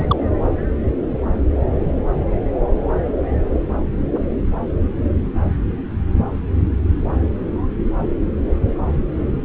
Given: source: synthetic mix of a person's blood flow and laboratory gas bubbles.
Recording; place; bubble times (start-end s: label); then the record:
Doppler ultrasound of blood flow; subclavian vein
0.00-0.05 s: bubbles
0.07-0.17 s: bubbles
From the record:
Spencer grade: 1 (occasional bubble signal discernible with the cardiac motion signal, with majority of cardiac periods free of bubbles); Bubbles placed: anywhere in the cardiac cycle